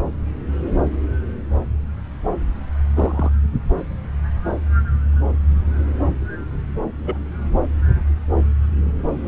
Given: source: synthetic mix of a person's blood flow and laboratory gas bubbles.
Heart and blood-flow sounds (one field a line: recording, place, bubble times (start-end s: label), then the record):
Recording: Doppler ultrasound of blood flow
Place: subclavian vein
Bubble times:
2.95-3.30 s: bubbles
7.04-7.17 s: bubbles
From the record:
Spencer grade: 2 (many but less than half of the cardiac periods contain bubble signals, singularly or in groups)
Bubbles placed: anywhere in the cardiac cycle